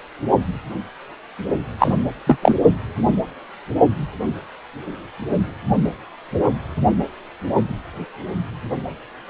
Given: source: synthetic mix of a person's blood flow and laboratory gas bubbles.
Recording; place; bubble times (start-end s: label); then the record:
Doppler ultrasound of blood flow; precordium
1.79-1.96 s: bubbles
2.27-2.38 s: bubbles
2.42-2.56 s: bubbles
From the record:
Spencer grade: 1 (occasional bubble signal discernible with the cardiac motion signal, with majority of cardiac periods free of bubbles); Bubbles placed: anywhere in the cardiac cycle